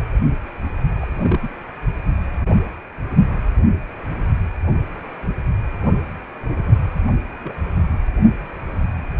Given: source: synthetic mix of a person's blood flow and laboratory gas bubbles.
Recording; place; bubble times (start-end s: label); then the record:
Doppler ultrasound of blood flow; precordium
1.01-1.06 s: bubbles
1.20-1.51 s: bubbles
7.43-7.54 s: bubbles
From the record:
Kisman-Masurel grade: 121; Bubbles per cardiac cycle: 1 to 2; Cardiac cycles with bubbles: 10 to 50%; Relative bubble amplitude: barely perceptible (0.100 to 0.250); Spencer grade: 2 (many but less than half of the cardiac periods contain bubble signals, singularly or in groups); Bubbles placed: only in the low amplitude regions of the cardiac cycle